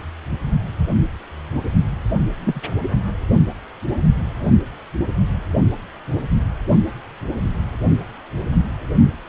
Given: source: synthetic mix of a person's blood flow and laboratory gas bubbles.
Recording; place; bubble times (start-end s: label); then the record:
Doppler ultrasound of blood flow; precordium
2.45-2.60 s: bubbles
From the record:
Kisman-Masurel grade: 121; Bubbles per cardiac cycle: 1 to 2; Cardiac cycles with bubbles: 10 to 50%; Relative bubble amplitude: barely perceptible (0.100 to 0.250); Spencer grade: 2 (many but less than half of the cardiac periods contain bubble signals, singularly or in groups); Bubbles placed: only in the low amplitude regions of the cardiac cycle